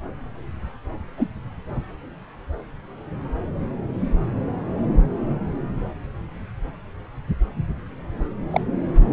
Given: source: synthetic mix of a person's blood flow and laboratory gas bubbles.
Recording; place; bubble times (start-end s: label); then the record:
Doppler ultrasound of blood flow; subclavian vein
1.17-1.28 s: bubbles
8.51-8.61 s: bubbles
From the record:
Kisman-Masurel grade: 122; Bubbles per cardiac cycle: 1 to 2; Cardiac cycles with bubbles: 10 to 50%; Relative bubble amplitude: moderate (0.250 to 0.450); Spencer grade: 2 (many but less than half of the cardiac periods contain bubble signals, singularly or in groups); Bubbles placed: anywhere in the cardiac cycle